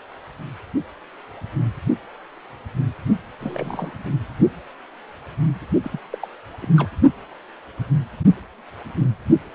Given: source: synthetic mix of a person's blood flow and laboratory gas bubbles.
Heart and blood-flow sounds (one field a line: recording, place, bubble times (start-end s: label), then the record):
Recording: Doppler ultrasound of blood flow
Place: precordium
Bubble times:
3.41-3.98 s: bubbles
4.05-4.10 s: bubbles
5.83-6.00 s: bubbles
6.11-6.18 s: bubbles
6.22-6.27 s: bubbles
6.61-6.68 s: bubbles
6.77-6.90 s: bubbles
From the record:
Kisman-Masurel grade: 221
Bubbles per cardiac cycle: several, 3 to 8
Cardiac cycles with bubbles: 10 to 50%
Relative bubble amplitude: barely perceptible (0.100 to 0.250)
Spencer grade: 2 (many but less than half of the cardiac periods contain bubble signals, singularly or in groups)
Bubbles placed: only in the low amplitude regions of the cardiac cycle